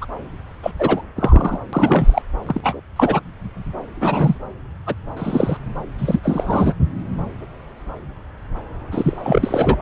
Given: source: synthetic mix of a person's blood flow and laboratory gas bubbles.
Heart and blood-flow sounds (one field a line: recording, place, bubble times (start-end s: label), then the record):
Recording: Doppler ultrasound of blood flow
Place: subclavian vein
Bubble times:
0.01-0.05 s: bubbles
0.62-0.71 s: bubbles
0.78-1.02 s: bubbles
1.16-1.59 s: bubbles
1.73-2.22 s: bubbles
2.46-2.80 s: bubbles
2.96-3.21 s: bubbles
4.00-4.38 s: bubbles
4.86-4.95 s: bubbles
5.17-5.57 s: bubbles
5.98-6.20 s: bubbles
6.23-6.73 s: bubbles
8.91-9.77 s: bubbles
From the record:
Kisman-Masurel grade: 233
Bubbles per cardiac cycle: several, 3 to 8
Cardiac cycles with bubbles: 50 to 99%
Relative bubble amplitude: loud (0.450 to 0.775)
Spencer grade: 3 (all of the cardiac periods contain showers or single bubble signals, but not dominating or overriding the cardiac motion signals)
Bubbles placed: anywhere in the cardiac cycle